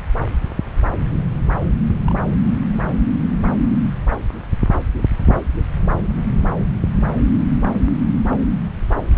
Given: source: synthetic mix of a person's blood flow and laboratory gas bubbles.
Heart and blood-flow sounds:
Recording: Doppler ultrasound of blood flow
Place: subclavian vein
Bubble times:
2.06-2.20 s: bubbles
5.20-5.36 s: bubbles
From the record:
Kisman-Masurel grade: 111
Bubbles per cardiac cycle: 1 to 2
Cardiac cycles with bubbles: 1 to 10%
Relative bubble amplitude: barely perceptible (0.100 to 0.250)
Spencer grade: 1 (occasional bubble signal discernible with the cardiac motion signal, with majority of cardiac periods free of bubbles)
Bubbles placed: anywhere in the cardiac cycle

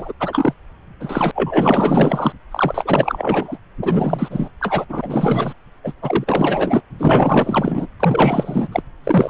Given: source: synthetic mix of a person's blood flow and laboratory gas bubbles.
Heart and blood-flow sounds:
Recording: Doppler ultrasound of blood flow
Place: subclavian vein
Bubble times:
0.00-0.12 s: bubbles
0.19-0.54 s: bubbles
1.00-1.31 s: bubbles
1.35-2.32 s: bubbles
2.51-3.58 s: bubbles
3.81-4.49 s: bubbles
4.60-4.85 s: bubbles
4.88-5.54 s: bubbles
5.83-5.93 s: bubbles
6.02-6.83 s: bubbles
7.00-7.87 s: bubbles
8.00-8.68 s: bubbles
8.72-8.83 s: bubbles
9.04-9.30 s: bubbles
From the record:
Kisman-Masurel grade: 444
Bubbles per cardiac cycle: continuous sound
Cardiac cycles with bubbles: 100%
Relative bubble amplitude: maximal (0.775 to 0.999)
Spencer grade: 4 (maximum detectable bubble signal sounding continuously throughout systole and diastole of every cardiac period, and overriding the amplitude of the normal cardiac signals)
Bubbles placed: anywhere in the cardiac cycle

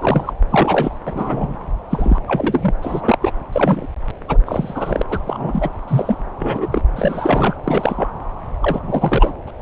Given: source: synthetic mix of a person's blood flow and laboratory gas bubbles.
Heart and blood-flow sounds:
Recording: Doppler ultrasound of blood flow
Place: subclavian vein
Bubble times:
0.01-0.33 s: bubbles
0.49-0.96 s: bubbles
1.06-1.55 s: bubbles
1.90-2.20 s: bubbles
2.27-2.71 s: bubbles
2.81-3.18 s: bubbles
3.22-3.31 s: bubbles
3.52-3.86 s: bubbles
4.27-4.38 s: bubbles
4.46-5.02 s: bubbles
5.09-5.19 s: bubbles
5.26-5.70 s: bubbles
5.88-6.17 s: bubbles
6.38-6.81 s: bubbles
6.96-7.54 s: bubbles
7.63-8.11 s: bubbles
8.61-9.33 s: bubbles
9.47-9.51 s: bubbles
From the record:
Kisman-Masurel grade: 242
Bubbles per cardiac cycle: several, 3 to 8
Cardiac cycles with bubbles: 100%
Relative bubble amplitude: moderate (0.250 to 0.450)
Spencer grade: 3 (all of the cardiac periods contain showers or single bubble signals, but not dominating or overriding the cardiac motion signals)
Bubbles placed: anywhere in the cardiac cycle

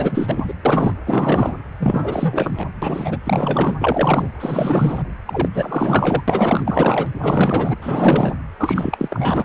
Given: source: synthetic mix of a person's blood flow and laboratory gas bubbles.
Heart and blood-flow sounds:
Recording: Doppler ultrasound of blood flow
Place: precordium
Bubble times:
0.00-0.54 s: bubbles
0.65-0.94 s: bubbles
1.05-1.54 s: bubbles
1.79-2.67 s: bubbles
2.82-3.17 s: bubbles
3.26-3.76 s: bubbles
3.80-4.29 s: bubbles
4.40-5.03 s: bubbles
5.26-5.49 s: bubbles
5.54-6.23 s: bubbles
6.28-7.08 s: bubbles
7.22-7.75 s: bubbles
7.82-8.36 s: bubbles
8.59-9.45 s: bubbles
From the record:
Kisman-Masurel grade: 444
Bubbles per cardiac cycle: continuous sound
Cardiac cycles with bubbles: 100%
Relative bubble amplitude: maximal (0.775 to 0.999)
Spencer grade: 4 (maximum detectable bubble signal sounding continuously throughout systole and diastole of every cardiac period, and overriding the amplitude of the normal cardiac signals)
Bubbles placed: anywhere in the cardiac cycle

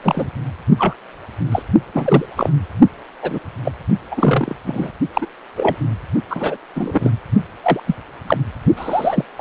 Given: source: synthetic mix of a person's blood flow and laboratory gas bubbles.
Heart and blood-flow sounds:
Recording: Doppler ultrasound of blood flow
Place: precordium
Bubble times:
0.03-0.27 s: bubbles
0.78-0.94 s: bubbles
1.51-1.62 s: bubbles
1.93-2.25 s: bubbles
2.35-2.50 s: bubbles
3.22-3.39 s: bubbles
3.65-3.72 s: bubbles
4.11-4.55 s: bubbles
4.67-4.92 s: bubbles
5.14-5.26 s: bubbles
5.56-5.76 s: bubbles
6.30-6.57 s: bubbles
6.74-7.10 s: bubbles
7.62-7.80 s: bubbles
7.87-7.95 s: bubbles
8.26-8.38 s: bubbles
8.77-9.24 s: bubbles
9.38-9.41 s: bubbles
From the record:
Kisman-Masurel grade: 243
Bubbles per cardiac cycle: several, 3 to 8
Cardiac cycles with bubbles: 100%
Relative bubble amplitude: loud (0.450 to 0.775)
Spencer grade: 3 (all of the cardiac periods contain showers or single bubble signals, but not dominating or overriding the cardiac motion signals)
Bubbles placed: only in the low amplitude regions of the cardiac cycle

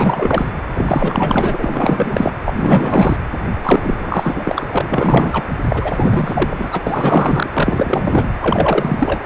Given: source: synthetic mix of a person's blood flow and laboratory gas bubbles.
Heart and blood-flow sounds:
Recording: Doppler ultrasound of blood flow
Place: precordium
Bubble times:
0.00-0.52 s: bubbles
0.75-2.33 s: bubbles
2.45-2.54 s: bubbles
2.56-3.17 s: bubbles
3.64-4.64 s: bubbles
4.69-5.45 s: bubbles
5.67-6.81 s: bubbles
6.86-7.50 s: bubbles
7.53-8.27 s: bubbles
8.39-9.21 s: bubbles
From the record:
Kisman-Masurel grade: 444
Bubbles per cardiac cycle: continuous sound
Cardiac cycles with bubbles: 100%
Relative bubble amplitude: maximal (0.775 to 0.999)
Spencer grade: 4 (maximum detectable bubble signal sounding continuously throughout systole and diastole of every cardiac period, and overriding the amplitude of the normal cardiac signals)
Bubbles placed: anywhere in the cardiac cycle

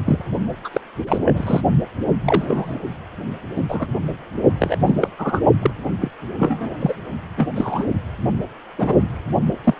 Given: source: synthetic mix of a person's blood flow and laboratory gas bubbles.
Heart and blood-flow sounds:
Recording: Doppler ultrasound of blood flow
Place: precordium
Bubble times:
0.06-0.23 s: bubbles
0.64-0.69 s: bubbles
0.73-0.81 s: bubbles
1.03-1.61 s: bubbles
2.25-2.80 s: bubbles
3.56-3.61 s: bubbles
3.69-3.87 s: bubbles
4.59-4.76 s: bubbles
4.85-4.95 s: bubbles
4.99-5.08 s: bubbles
5.18-5.45 s: bubbles
5.62-5.70 s: bubbles
6.01-6.11 s: bubbles
6.39-6.76 s: bubbles
6.79-6.93 s: bubbles
7.37-7.47 s: bubbles
7.55-7.84 s: bubbles
8.78-9.01 s: bubbles
9.64-9.74 s: bubbles
From the record:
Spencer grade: 3 (all of the cardiac periods contain showers or single bubble signals, but not dominating or overriding the cardiac motion signals)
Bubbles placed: only in the low amplitude regions of the cardiac cycle

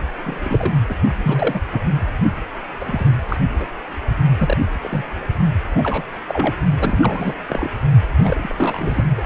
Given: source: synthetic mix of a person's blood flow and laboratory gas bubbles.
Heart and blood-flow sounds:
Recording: Doppler ultrasound of blood flow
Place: precordium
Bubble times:
0.24-0.74 s: bubbles
0.89-0.95 s: bubbles
1.23-1.61 s: bubbles
1.72-1.79 s: bubbles
2.80-3.11 s: bubbles
3.28-3.37 s: bubbles
3.59-3.66 s: bubbles
4.39-4.57 s: bubbles
4.83-5.06 s: bubbles
5.75-6.03 s: bubbles
6.28-6.54 s: bubbles
6.80-7.33 s: bubbles
7.50-7.68 s: bubbles
8.16-8.55 s: bubbles
8.58-9.11 s: bubbles
9.17-9.22 s: bubbles
From the record:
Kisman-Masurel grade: 242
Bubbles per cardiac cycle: several, 3 to 8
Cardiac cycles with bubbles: 100%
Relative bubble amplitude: moderate (0.250 to 0.450)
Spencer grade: 3 (all of the cardiac periods contain showers or single bubble signals, but not dominating or overriding the cardiac motion signals)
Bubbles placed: only in the low amplitude regions of the cardiac cycle

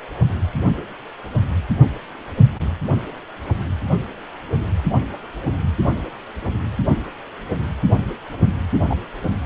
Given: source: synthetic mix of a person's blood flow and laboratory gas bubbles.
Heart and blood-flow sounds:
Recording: Doppler ultrasound of blood flow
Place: precordium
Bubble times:
8.89-8.96 s: bubbles
From the record:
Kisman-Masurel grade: 113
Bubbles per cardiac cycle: 1 to 2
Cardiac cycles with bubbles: 1 to 10%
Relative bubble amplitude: loud (0.450 to 0.775)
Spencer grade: 1 (occasional bubble signal discernible with the cardiac motion signal, with majority of cardiac periods free of bubbles)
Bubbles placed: only in the low amplitude regions of the cardiac cycle

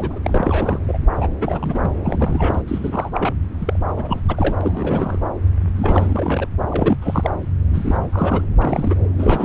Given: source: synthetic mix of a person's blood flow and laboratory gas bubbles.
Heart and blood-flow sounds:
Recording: Doppler ultrasound of blood flow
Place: subclavian vein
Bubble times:
0.00-0.20 s: bubbles
0.23-0.79 s: bubbles
0.88-0.98 s: bubbles
1.17-1.28 s: bubbles
1.41-1.91 s: bubbles
2.05-2.62 s: bubbles
2.68-3.33 s: bubbles
3.59-3.79 s: bubbles
3.88-3.93 s: bubbles
3.96-4.20 s: bubbles
4.29-4.56 s: bubbles
4.60-5.19 s: bubbles
5.75-6.47 s: bubbles
6.68-6.96 s: bubbles
7.01-7.30 s: bubbles
7.67-8.09 s: bubbles
8.12-8.43 s: bubbles
8.62-8.96 s: bubbles
9.18-9.45 s: bubbles
From the record:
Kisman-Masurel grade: 342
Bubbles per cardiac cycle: rolling drumbeat, 9 or more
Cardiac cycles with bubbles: 100%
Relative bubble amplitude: moderate (0.250 to 0.450)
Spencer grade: 3 (all of the cardiac periods contain showers or single bubble signals, but not dominating or overriding the cardiac motion signals)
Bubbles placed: anywhere in the cardiac cycle

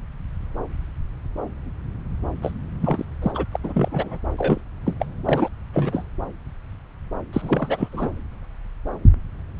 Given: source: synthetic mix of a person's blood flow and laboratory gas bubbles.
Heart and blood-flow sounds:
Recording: Doppler ultrasound of blood flow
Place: subclavian vein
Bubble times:
2.42-2.52 s: bubbles
2.80-3.04 s: bubbles
3.21-3.44 s: bubbles
3.52-3.57 s: bubbles
3.63-4.18 s: bubbles
4.38-4.61 s: bubbles
4.86-4.95 s: bubbles
4.99-5.05 s: bubbles
5.25-5.48 s: bubbles
5.73-6.05 s: bubbles
7.32-7.88 s: bubbles
7.92-8.11 s: bubbles
From the record:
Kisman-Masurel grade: 332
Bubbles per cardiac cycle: rolling drumbeat, 9 or more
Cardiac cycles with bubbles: 50 to 99%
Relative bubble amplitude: moderate (0.250 to 0.450)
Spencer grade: 3 (all of the cardiac periods contain showers or single bubble signals, but not dominating or overriding the cardiac motion signals)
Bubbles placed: anywhere in the cardiac cycle

